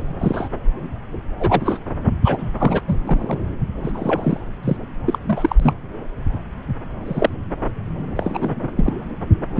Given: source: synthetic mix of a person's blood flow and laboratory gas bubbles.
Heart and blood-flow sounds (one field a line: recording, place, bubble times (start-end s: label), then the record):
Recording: Doppler ultrasound of blood flow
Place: subclavian vein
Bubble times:
0.18-0.48 s: bubbles
1.40-1.78 s: bubbles
2.24-2.50 s: bubbles
2.60-2.81 s: bubbles
2.88-2.96 s: bubbles
3.04-3.38 s: bubbles
3.83-4.39 s: bubbles
4.62-4.77 s: bubbles
5.06-5.19 s: bubbles
5.26-5.74 s: bubbles
7.06-7.30 s: bubbles
8.16-8.67 s: bubbles
8.77-8.91 s: bubbles
9.55-9.60 s: bubbles
From the record:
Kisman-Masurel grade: 232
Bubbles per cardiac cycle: several, 3 to 8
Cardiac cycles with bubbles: 50 to 99%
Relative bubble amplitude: moderate (0.250 to 0.450)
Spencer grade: 3 (all of the cardiac periods contain showers or single bubble signals, but not dominating or overriding the cardiac motion signals)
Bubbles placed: anywhere in the cardiac cycle